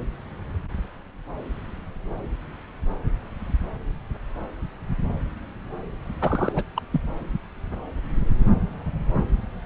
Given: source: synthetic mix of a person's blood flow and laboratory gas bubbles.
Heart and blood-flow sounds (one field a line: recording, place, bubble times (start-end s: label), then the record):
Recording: Doppler ultrasound of blood flow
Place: subclavian vein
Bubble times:
6.21-6.63 s: bubbles
6.76-6.81 s: bubbles
6.90-7.00 s: bubbles
From the record:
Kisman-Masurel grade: 221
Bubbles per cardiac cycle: several, 3 to 8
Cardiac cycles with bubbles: 10 to 50%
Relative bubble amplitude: barely perceptible (0.100 to 0.250)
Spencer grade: 2 (many but less than half of the cardiac periods contain bubble signals, singularly or in groups)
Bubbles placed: anywhere in the cardiac cycle